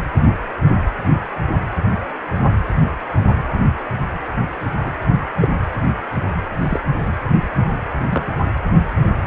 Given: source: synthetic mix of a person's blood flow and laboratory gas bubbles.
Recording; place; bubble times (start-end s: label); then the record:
Doppler ultrasound of blood flow; precordium
4.86-4.91 s: bubbles
5.40-5.48 s: bubbles
6.59-6.80 s: bubbles
8.09-8.26 s: bubbles
From the record:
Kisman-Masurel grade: 122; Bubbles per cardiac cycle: 1 to 2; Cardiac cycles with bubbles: 10 to 50%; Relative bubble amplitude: moderate (0.250 to 0.450); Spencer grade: 2 (many but less than half of the cardiac periods contain bubble signals, singularly or in groups); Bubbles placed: anywhere in the cardiac cycle